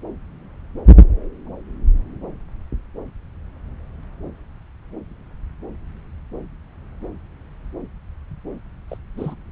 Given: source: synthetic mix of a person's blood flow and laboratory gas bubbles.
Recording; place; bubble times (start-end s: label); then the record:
Doppler ultrasound of blood flow; subclavian vein
8.88-8.97 s: bubbles
9.17-9.36 s: bubbles
From the record:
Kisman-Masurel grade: 221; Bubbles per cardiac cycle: several, 3 to 8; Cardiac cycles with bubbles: 10 to 50%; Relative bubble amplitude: barely perceptible (0.100 to 0.250); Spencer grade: 2 (many but less than half of the cardiac periods contain bubble signals, singularly or in groups); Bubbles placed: anywhere in the cardiac cycle